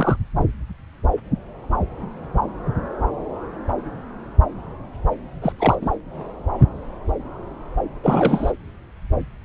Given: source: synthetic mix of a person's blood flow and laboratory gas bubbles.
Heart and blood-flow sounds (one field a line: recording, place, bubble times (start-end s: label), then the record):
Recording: Doppler ultrasound of blood flow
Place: subclavian vein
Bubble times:
0.00-0.16 s: bubbles
5.42-5.52 s: bubbles
5.58-5.75 s: bubbles
5.81-5.89 s: bubbles
8.03-8.52 s: bubbles
From the record:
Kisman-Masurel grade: 222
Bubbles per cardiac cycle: several, 3 to 8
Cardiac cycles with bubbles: 10 to 50%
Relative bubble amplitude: moderate (0.250 to 0.450)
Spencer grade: 2 (many but less than half of the cardiac periods contain bubble signals, singularly or in groups)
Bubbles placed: anywhere in the cardiac cycle